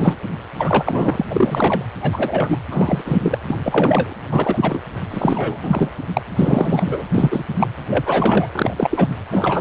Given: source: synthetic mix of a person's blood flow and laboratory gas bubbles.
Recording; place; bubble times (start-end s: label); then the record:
Doppler ultrasound of blood flow; precordium
0.00-0.16 s: bubbles
0.58-1.25 s: bubbles
1.30-1.85 s: bubbles
2.02-2.58 s: bubbles
2.71-3.02 s: bubbles
3.04-3.39 s: bubbles
3.48-3.57 s: bubbles
3.64-4.13 s: bubbles
4.31-4.80 s: bubbles
5.11-5.58 s: bubbles
5.62-5.89 s: bubbles
6.13-6.22 s: bubbles
6.36-7.04 s: bubbles
7.15-7.45 s: bubbles
7.60-7.67 s: bubbles
7.89-8.47 s: bubbles
8.51-9.14 s: bubbles
9.30-9.61 s: bubbles
From the record:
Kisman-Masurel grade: 342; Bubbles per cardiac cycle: rolling drumbeat, 9 or more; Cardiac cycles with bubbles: 100%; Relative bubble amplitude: moderate (0.250 to 0.450); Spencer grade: 3 (all of the cardiac periods contain showers or single bubble signals, but not dominating or overriding the cardiac motion signals); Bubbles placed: anywhere in the cardiac cycle